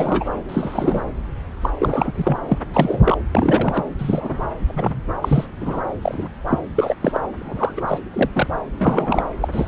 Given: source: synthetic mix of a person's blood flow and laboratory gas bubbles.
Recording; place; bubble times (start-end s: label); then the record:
Doppler ultrasound of blood flow; subclavian vein
0.00-0.25 s: bubbles
0.48-1.15 s: bubbles
1.61-1.70 s: bubbles
1.79-2.12 s: bubbles
2.15-2.38 s: bubbles
2.48-2.58 s: bubbles
2.72-3.18 s: bubbles
3.34-3.83 s: bubbles
3.98-4.37 s: bubbles
4.68-5.02 s: bubbles
5.21-5.47 s: bubbles
5.60-5.80 s: bubbles
6.01-6.29 s: bubbles
6.47-6.58 s: bubbles
6.75-6.96 s: bubbles
7.00-7.20 s: bubbles
7.35-7.81 s: bubbles
7.88-7.98 s: bubbles
8.13-8.29 s: bubbles
8.33-8.47 s: bubbles
8.79-9.26 s: bubbles
9.41-9.48 s: bubbles
9.52-9.67 s: bubbles
From the record:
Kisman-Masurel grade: 243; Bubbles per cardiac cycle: several, 3 to 8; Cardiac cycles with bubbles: 100%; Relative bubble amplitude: loud (0.450 to 0.775); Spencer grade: 3 (all of the cardiac periods contain showers or single bubble signals, but not dominating or overriding the cardiac motion signals); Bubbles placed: anywhere in the cardiac cycle